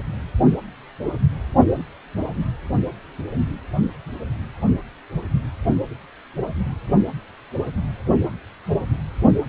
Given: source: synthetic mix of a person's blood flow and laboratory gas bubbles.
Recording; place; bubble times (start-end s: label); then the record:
Doppler ultrasound of blood flow; precordium
no bubbles
From the record:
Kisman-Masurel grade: 000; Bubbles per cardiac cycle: 0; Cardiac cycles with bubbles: 0%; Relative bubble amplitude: no bubbles discernible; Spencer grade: 0 (complete lack of bubble signals)